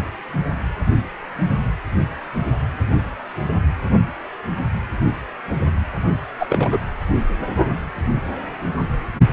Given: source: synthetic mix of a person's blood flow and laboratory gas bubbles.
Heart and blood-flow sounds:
Doppler ultrasound of blood flow; precordium
6.39-6.78 s: bubbles
From the record:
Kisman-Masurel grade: 223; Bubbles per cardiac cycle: several, 3 to 8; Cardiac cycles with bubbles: 10 to 50%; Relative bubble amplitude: loud (0.450 to 0.775); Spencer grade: 2 (many but less than half of the cardiac periods contain bubble signals, singularly or in groups); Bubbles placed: anywhere in the cardiac cycle

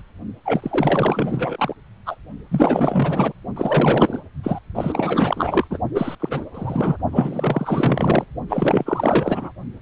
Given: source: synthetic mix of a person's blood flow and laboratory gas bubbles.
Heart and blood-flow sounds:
Doppler ultrasound of blood flow; precordium
0.00-0.03 s: bubbles
0.44-1.73 s: bubbles
2.06-2.16 s: bubbles
2.51-3.33 s: bubbles
3.56-4.20 s: bubbles
4.43-4.59 s: bubbles
4.75-5.67 s: bubbles
5.70-5.79 s: bubbles
5.94-6.15 s: bubbles
6.19-6.45 s: bubbles
6.54-6.97 s: bubbles
7.11-8.25 s: bubbles
8.49-9.52 s: bubbles
From the record:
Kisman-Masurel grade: 444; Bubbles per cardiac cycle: continuous sound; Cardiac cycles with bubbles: 100%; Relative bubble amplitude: maximal (0.775 to 0.999); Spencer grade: 4 (maximum detectable bubble signal sounding continuously throughout systole and diastole of every cardiac period, and overriding the amplitude of the normal cardiac signals); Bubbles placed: only in the low amplitude regions of the cardiac cycle

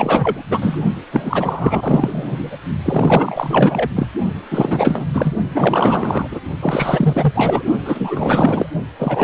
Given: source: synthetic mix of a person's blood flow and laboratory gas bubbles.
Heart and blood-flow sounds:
Doppler ultrasound of blood flow; precordium
0.00-0.42 s: bubbles
0.51-0.81 s: bubbles
1.12-2.56 s: bubbles
2.84-3.89 s: bubbles
3.95-4.07 s: bubbles
4.50-5.05 s: bubbles
5.13-5.35 s: bubbles
5.51-6.28 s: bubbles
6.31-6.39 s: bubbles
6.61-7.63 s: bubbles
7.85-8.66 s: bubbles
8.99-9.24 s: bubbles
From the record:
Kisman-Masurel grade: 444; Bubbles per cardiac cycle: continuous sound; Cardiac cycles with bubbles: 100%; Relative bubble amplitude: maximal (0.775 to 0.999); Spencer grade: 4 (maximum detectable bubble signal sounding continuously throughout systole and diastole of every cardiac period, and overriding the amplitude of the normal cardiac signals); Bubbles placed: only in the low amplitude regions of the cardiac cycle

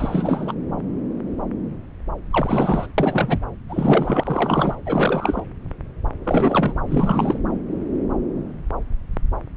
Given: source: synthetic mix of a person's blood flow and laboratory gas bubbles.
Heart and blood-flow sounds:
Doppler ultrasound of blood flow; subclavian vein
0.00-0.54 s: bubbles
2.31-2.87 s: bubbles
2.98-3.40 s: bubbles
3.69-4.75 s: bubbles
4.85-5.44 s: bubbles
6.24-6.75 s: bubbles
6.88-7.38 s: bubbles
From the record:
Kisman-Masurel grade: 332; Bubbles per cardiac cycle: rolling drumbeat, 9 or more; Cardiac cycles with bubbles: 50 to 99%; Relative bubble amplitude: moderate (0.250 to 0.450); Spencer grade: 3 (all of the cardiac periods contain showers or single bubble signals, but not dominating or overriding the cardiac motion signals); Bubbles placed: anywhere in the cardiac cycle

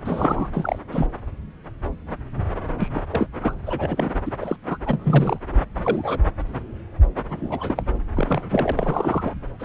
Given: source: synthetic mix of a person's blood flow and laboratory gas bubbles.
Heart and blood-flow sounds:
Doppler ultrasound of blood flow; subclavian vein
0.00-0.48 s: bubbles
0.53-0.78 s: bubbles
0.91-1.07 s: bubbles
2.79-2.88 s: bubbles
2.94-3.01 s: bubbles
3.10-3.26 s: bubbles
3.40-3.53 s: bubbles
3.66-4.12 s: bubbles
4.25-4.31 s: bubbles
4.40-4.56 s: bubbles
4.68-4.78 s: bubbles
4.86-5.39 s: bubbles
5.74-6.21 s: bubbles
7.29-7.83 s: bubbles
8.15-8.42 s: bubbles
8.51-8.72 s: bubbles
8.76-9.34 s: bubbles
9.59-9.65 s: bubbles
From the record:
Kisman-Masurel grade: 232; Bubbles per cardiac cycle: several, 3 to 8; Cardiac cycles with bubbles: 50 to 99%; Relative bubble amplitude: moderate (0.250 to 0.450); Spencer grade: 3 (all of the cardiac periods contain showers or single bubble signals, but not dominating or overriding the cardiac motion signals); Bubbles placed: anywhere in the cardiac cycle

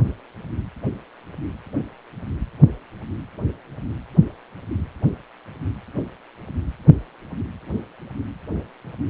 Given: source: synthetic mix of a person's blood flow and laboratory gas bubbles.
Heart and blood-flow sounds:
Doppler ultrasound of blood flow; precordium
no bubbles
From the record:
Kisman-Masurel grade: 000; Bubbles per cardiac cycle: 0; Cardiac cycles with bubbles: 0%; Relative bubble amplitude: no bubbles discernible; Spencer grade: 0 (complete lack of bubble signals)

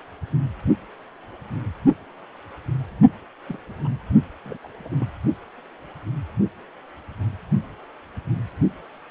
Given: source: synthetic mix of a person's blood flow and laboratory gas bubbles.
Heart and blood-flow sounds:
Doppler ultrasound of blood flow; precordium
3.47-3.58 s: bubbles
3.84-3.88 s: bubbles
4.45-4.57 s: bubbles
4.64-4.67 s: bubbles
4.84-4.89 s: bubbles
4.96-5.07 s: bubbles
From the record:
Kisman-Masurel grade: 221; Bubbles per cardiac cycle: several, 3 to 8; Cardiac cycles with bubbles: 10 to 50%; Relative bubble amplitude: barely perceptible (0.100 to 0.250); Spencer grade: 2 (many but less than half of the cardiac periods contain bubble signals, singularly or in groups); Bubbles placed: only in the low amplitude regions of the cardiac cycle

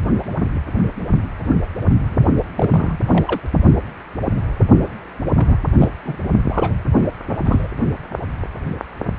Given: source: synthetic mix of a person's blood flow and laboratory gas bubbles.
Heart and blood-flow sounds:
Doppler ultrasound of blood flow; precordium
2.56-3.00 s: bubbles
3.08-3.40 s: bubbles
5.37-5.57 s: bubbles
5.79-5.94 s: bubbles
6.04-6.16 s: bubbles
6.49-6.75 s: bubbles
6.95-7.07 s: bubbles
7.45-7.68 s: bubbles
From the record:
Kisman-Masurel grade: 222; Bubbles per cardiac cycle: several, 3 to 8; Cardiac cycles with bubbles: 10 to 50%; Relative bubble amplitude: moderate (0.250 to 0.450); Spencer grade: 2 (many but less than half of the cardiac periods contain bubble signals, singularly or in groups); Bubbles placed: only in the low amplitude regions of the cardiac cycle

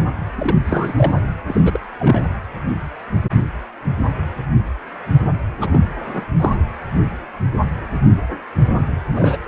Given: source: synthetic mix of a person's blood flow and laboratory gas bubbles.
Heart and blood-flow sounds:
Doppler ultrasound of blood flow; precordium
0.00-0.04 s: bubbles
0.38-0.57 s: bubbles
0.64-1.12 s: bubbles
1.48-1.79 s: bubbles
1.99-2.25 s: bubbles
5.60-5.80 s: bubbles
6.02-6.25 s: bubbles
6.39-6.56 s: bubbles
9.12-9.37 s: bubbles
From the record:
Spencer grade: 3 (all of the cardiac periods contain showers or single bubble signals, but not dominating or overriding the cardiac motion signals); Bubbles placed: anywhere in the cardiac cycle

